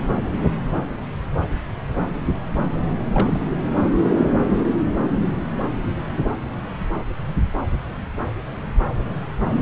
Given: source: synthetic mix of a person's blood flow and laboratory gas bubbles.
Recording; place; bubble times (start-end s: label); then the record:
Doppler ultrasound of blood flow; subclavian vein
3.12-3.45 s: bubbles
From the record:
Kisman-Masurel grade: 211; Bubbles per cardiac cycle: several, 3 to 8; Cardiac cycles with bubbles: 1 to 10%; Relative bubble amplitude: barely perceptible (0.100 to 0.250); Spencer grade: 1 (occasional bubble signal discernible with the cardiac motion signal, with majority of cardiac periods free of bubbles); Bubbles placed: anywhere in the cardiac cycle